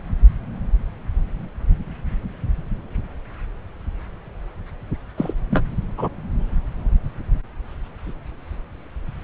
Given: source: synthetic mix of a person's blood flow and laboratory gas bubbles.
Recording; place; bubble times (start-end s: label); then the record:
Doppler ultrasound of blood flow; subclavian vein
5.17-5.33 s: bubbles
5.50-5.65 s: bubbles
5.97-6.09 s: bubbles
From the record:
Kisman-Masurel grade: 222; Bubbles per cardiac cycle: several, 3 to 8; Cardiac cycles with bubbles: 10 to 50%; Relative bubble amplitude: moderate (0.250 to 0.450); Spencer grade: 2 (many but less than half of the cardiac periods contain bubble signals, singularly or in groups); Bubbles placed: anywhere in the cardiac cycle